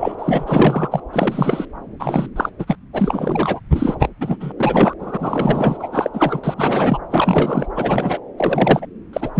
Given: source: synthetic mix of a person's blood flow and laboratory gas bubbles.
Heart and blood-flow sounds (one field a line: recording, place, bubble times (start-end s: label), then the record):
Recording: Doppler ultrasound of blood flow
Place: subclavian vein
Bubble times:
0.00-0.15 s: bubbles
0.18-1.00 s: bubbles
1.12-1.66 s: bubbles
1.99-2.29 s: bubbles
2.36-2.49 s: bubbles
2.58-2.76 s: bubbles
2.93-3.60 s: bubbles
3.73-3.96 s: bubbles
3.99-4.09 s: bubbles
4.21-4.37 s: bubbles
4.40-4.52 s: bubbles
4.58-4.94 s: bubbles
4.99-5.88 s: bubbles
5.92-6.09 s: bubbles
6.13-6.40 s: bubbles
6.44-6.54 s: bubbles
6.57-6.98 s: bubbles
7.10-7.66 s: bubbles
7.75-8.20 s: bubbles
8.37-8.86 s: bubbles
9.13-9.30 s: bubbles
9.34-9.40 s: bubbles
From the record:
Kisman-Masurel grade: 343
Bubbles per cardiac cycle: rolling drumbeat, 9 or more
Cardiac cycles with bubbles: 100%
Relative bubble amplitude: loud (0.450 to 0.775)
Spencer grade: 3 (all of the cardiac periods contain showers or single bubble signals, but not dominating or overriding the cardiac motion signals)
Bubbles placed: anywhere in the cardiac cycle